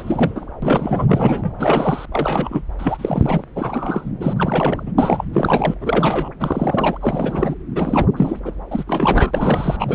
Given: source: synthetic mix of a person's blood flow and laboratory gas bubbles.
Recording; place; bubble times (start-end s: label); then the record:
Doppler ultrasound of blood flow; subclavian vein
0.00-0.45 s: bubbles
0.62-1.52 s: bubbles
1.58-2.06 s: bubbles
2.12-2.62 s: bubbles
2.78-3.44 s: bubbles
3.56-4.11 s: bubbles
4.20-4.33 s: bubbles
4.36-4.83 s: bubbles
4.85-4.92 s: bubbles
4.98-5.30 s: bubbles
5.33-5.75 s: bubbles
5.80-6.29 s: bubbles
6.40-6.98 s: bubbles
7.00-7.55 s: bubbles
7.75-8.07 s: bubbles
8.17-8.39 s: bubbles
8.45-8.54 s: bubbles
8.71-8.84 s: bubbles
8.87-9.31 s: bubbles
9.34-9.77 s: bubbles
9.79-9.95 s: bubbles
From the record:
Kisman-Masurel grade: 342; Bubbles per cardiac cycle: rolling drumbeat, 9 or more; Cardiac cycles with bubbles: 100%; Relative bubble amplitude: moderate (0.250 to 0.450); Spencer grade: 3 (all of the cardiac periods contain showers or single bubble signals, but not dominating or overriding the cardiac motion signals); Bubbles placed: anywhere in the cardiac cycle